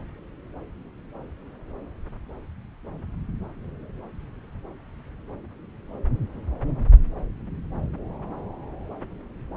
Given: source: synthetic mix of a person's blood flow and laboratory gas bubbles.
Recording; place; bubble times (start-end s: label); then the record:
Doppler ultrasound of blood flow; subclavian vein
no bubbles
From the record:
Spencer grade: 0 (complete lack of bubble signals)